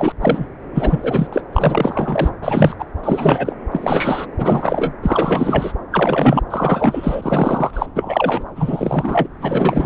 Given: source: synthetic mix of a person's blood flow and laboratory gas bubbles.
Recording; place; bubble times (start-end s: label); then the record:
Doppler ultrasound of blood flow; subclavian vein
0.00-0.12 s: bubbles
0.21-0.45 s: bubbles
0.74-1.27 s: bubbles
1.32-1.42 s: bubbles
1.52-2.31 s: bubbles
2.42-2.75 s: bubbles
2.79-2.85 s: bubbles
3.03-3.53 s: bubbles
3.71-4.26 s: bubbles
4.38-4.92 s: bubbles
5.03-5.73 s: bubbles
5.91-6.41 s: bubbles
6.50-7.86 s: bubbles
7.96-8.44 s: bubbles
8.56-9.27 s: bubbles
9.40-9.86 s: bubbles
From the record:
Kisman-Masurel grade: 343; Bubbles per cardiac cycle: rolling drumbeat, 9 or more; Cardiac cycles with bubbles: 100%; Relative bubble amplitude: loud (0.450 to 0.775); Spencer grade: 3 (all of the cardiac periods contain showers or single bubble signals, but not dominating or overriding the cardiac motion signals); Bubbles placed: anywhere in the cardiac cycle